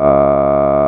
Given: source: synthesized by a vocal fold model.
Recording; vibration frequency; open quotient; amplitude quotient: sustained vowel; 70 Hz; 0.2; 1.1